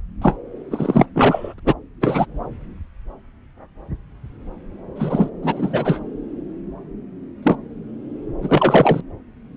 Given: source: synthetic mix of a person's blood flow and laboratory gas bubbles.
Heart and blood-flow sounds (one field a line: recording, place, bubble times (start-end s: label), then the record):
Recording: Doppler ultrasound of blood flow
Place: subclavian vein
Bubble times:
0.21-0.36 s: bubbles
0.71-1.05 s: bubbles
1.14-1.54 s: bubbles
1.66-1.74 s: bubbles
2.00-2.26 s: bubbles
4.96-5.29 s: bubbles
5.42-6.00 s: bubbles
7.42-7.56 s: bubbles
8.41-9.01 s: bubbles
From the record:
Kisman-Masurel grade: 233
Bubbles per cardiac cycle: several, 3 to 8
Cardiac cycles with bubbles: 50 to 99%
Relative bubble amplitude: loud (0.450 to 0.775)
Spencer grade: 3 (all of the cardiac periods contain showers or single bubble signals, but not dominating or overriding the cardiac motion signals)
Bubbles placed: anywhere in the cardiac cycle